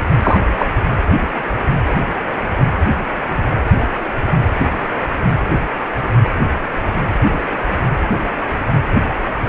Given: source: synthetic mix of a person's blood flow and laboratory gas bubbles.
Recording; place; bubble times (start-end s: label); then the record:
Doppler ultrasound of blood flow; precordium
0.22-0.39 s: bubbles
0.58-0.66 s: bubbles
From the record:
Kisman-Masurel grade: 113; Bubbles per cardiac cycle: 1 to 2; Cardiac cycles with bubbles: 1 to 10%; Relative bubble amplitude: loud (0.450 to 0.775); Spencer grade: 1 (occasional bubble signal discernible with the cardiac motion signal, with majority of cardiac periods free of bubbles); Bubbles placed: anywhere in the cardiac cycle